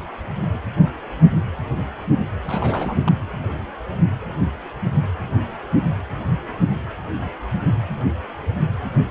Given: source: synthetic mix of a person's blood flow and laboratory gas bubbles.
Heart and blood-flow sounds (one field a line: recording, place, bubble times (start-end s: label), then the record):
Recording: Doppler ultrasound of blood flow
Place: precordium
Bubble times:
2.44-3.04 s: bubbles
3.07-3.10 s: bubbles
From the record:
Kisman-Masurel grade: 221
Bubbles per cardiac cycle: several, 3 to 8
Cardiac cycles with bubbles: 10 to 50%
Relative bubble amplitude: barely perceptible (0.100 to 0.250)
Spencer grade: 2 (many but less than half of the cardiac periods contain bubble signals, singularly or in groups)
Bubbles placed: anywhere in the cardiac cycle